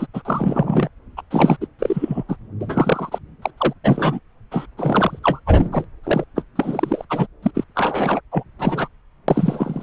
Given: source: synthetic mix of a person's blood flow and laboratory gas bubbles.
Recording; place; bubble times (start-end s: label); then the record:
Doppler ultrasound of blood flow; subclavian vein
0.00-0.07 s: bubbles
0.14-0.23 s: bubbles
0.25-0.89 s: bubbles
1.17-1.22 s: bubbles
1.30-1.56 s: bubbles
1.60-1.67 s: bubbles
1.78-2.23 s: bubbles
2.28-2.36 s: bubbles
2.60-3.19 s: bubbles
3.42-3.51 s: bubbles
3.58-3.74 s: bubbles
3.84-4.19 s: bubbles
4.51-4.66 s: bubbles
4.77-5.19 s: bubbles
5.23-5.39 s: bubbles
5.46-5.86 s: bubbles
6.03-6.24 s: bubbles
6.35-6.43 s: bubbles
6.55-7.05 s: bubbles
7.09-7.27 s: bubbles
7.42-7.51 s: bubbles
7.54-7.64 s: bubbles
7.75-8.21 s: bubbles
8.32-8.44 s: bubbles
8.59-8.88 s: bubbles
9.28-9.83 s: bubbles
From the record:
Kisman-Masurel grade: 243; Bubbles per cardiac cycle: several, 3 to 8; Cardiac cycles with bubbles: 100%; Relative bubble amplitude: loud (0.450 to 0.775); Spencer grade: 3 (all of the cardiac periods contain showers or single bubble signals, but not dominating or overriding the cardiac motion signals); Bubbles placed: anywhere in the cardiac cycle